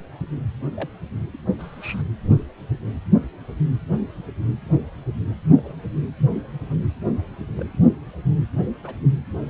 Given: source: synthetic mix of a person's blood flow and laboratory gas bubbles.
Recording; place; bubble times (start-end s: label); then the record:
Doppler ultrasound of blood flow; precordium
0.74-0.90 s: bubbles
1.33-1.36 s: bubbles
1.58-2.02 s: bubbles
2.23-2.39 s: bubbles
5.29-5.36 s: bubbles
5.53-5.75 s: bubbles
7.48-7.82 s: bubbles
8.84-8.95 s: bubbles
From the record:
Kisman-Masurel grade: 121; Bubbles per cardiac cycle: 1 to 2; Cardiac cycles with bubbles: 10 to 50%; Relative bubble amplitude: barely perceptible (0.100 to 0.250); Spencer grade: 2 (many but less than half of the cardiac periods contain bubble signals, singularly or in groups); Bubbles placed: anywhere in the cardiac cycle